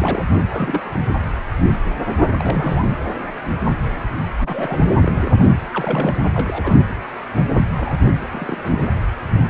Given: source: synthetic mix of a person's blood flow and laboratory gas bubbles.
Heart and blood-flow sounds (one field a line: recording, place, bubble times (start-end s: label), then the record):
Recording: Doppler ultrasound of blood flow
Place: precordium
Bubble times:
0.00-0.25 s: bubbles
0.49-0.90 s: bubbles
2.37-2.90 s: bubbles
4.38-4.79 s: bubbles
4.97-5.60 s: bubbles
5.72-6.18 s: bubbles
6.34-6.77 s: bubbles
7.75-7.94 s: bubbles
8.00-8.04 s: bubbles
8.27-8.83 s: bubbles
From the record:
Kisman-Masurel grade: 232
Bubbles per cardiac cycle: several, 3 to 8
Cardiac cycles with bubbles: 50 to 99%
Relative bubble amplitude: moderate (0.250 to 0.450)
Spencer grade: 3 (all of the cardiac periods contain showers or single bubble signals, but not dominating or overriding the cardiac motion signals)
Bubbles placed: anywhere in the cardiac cycle